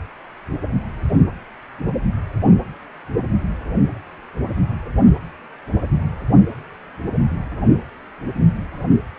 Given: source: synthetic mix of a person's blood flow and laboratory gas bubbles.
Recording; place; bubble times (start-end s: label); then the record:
Doppler ultrasound of blood flow; precordium
no bubbles
From the record:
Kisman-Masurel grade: 000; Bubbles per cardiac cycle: 0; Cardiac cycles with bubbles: 0%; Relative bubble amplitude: no bubbles discernible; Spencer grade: 0 (complete lack of bubble signals)